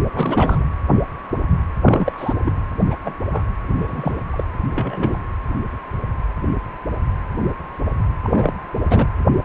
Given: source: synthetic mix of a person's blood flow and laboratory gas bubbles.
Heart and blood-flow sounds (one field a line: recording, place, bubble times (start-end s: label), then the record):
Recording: Doppler ultrasound of blood flow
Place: precordium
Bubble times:
0.13-0.66 s: bubbles
1.82-2.33 s: bubbles
2.45-2.53 s: bubbles
2.89-2.95 s: bubbles
3.04-3.14 s: bubbles
3.32-3.43 s: bubbles
3.75-4.23 s: bubbles
4.31-4.44 s: bubbles
4.70-5.18 s: bubbles
8.23-8.54 s: bubbles
8.89-9.07 s: bubbles
From the record:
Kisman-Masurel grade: 222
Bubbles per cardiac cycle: several, 3 to 8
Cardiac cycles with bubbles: 10 to 50%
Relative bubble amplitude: moderate (0.250 to 0.450)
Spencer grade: 2 (many but less than half of the cardiac periods contain bubble signals, singularly or in groups)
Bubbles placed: anywhere in the cardiac cycle